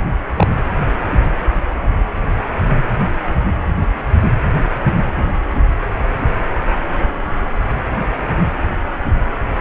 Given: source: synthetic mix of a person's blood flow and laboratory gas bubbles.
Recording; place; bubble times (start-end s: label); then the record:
Doppler ultrasound of blood flow; precordium
0.37-0.47 s: bubbles
From the record:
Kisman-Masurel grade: 113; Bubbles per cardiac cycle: 1 to 2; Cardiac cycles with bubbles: 1 to 10%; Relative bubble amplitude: loud (0.450 to 0.775); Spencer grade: 1 (occasional bubble signal discernible with the cardiac motion signal, with majority of cardiac periods free of bubbles); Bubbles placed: anywhere in the cardiac cycle